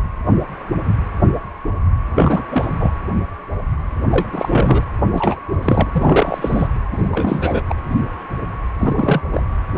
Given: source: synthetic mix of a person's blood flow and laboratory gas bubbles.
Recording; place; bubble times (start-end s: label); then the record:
Doppler ultrasound of blood flow; precordium
2.15-2.42 s: bubbles
2.49-2.73 s: bubbles
2.79-2.92 s: bubbles
4.10-4.25 s: bubbles
4.32-4.83 s: bubbles
5.11-5.42 s: bubbles
5.62-5.90 s: bubbles
5.94-6.68 s: bubbles
6.92-7.62 s: bubbles
7.69-7.75 s: bubbles
8.79-9.21 s: bubbles
9.33-9.43 s: bubbles
9.76-9.78 s: bubbles
From the record:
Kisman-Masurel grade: 332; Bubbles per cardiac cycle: rolling drumbeat, 9 or more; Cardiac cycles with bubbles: 50 to 99%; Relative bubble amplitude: moderate (0.250 to 0.450); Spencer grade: 3 (all of the cardiac periods contain showers or single bubble signals, but not dominating or overriding the cardiac motion signals); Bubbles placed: anywhere in the cardiac cycle